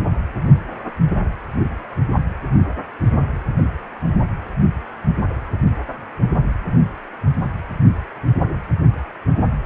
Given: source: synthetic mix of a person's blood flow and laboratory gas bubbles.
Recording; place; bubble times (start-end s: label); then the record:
Doppler ultrasound of blood flow; precordium
no bubbles
From the record:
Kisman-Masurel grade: 000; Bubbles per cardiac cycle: 0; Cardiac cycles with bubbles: 0%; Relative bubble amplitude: no bubbles discernible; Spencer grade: 0 (complete lack of bubble signals)